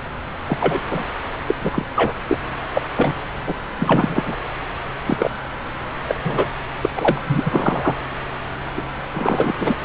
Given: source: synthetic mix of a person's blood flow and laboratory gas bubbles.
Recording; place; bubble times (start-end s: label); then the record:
Doppler ultrasound of blood flow; subclavian vein
0.46-0.57 s: bubbles
0.59-0.80 s: bubbles
0.90-1.04 s: bubbles
1.47-1.55 s: bubbles
1.60-1.69 s: bubbles
1.73-1.85 s: bubbles
1.95-2.14 s: bubbles
2.27-2.38 s: bubbles
2.74-2.81 s: bubbles
2.97-3.15 s: bubbles
3.46-3.54 s: bubbles
3.79-4.36 s: bubbles
5.06-5.30 s: bubbles
6.07-6.15 s: bubbles
6.24-6.48 s: bubbles
6.82-6.89 s: bubbles
6.96-7.21 s: bubbles
7.27-7.43 s: bubbles
7.46-7.96 s: bubbles
8.76-8.82 s: bubbles
9.14-9.53 s: bubbles
9.59-9.79 s: bubbles
9.81-9.85 s: bubbles
From the record:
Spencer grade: 3 (all of the cardiac periods contain showers or single bubble signals, but not dominating or overriding the cardiac motion signals); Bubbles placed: anywhere in the cardiac cycle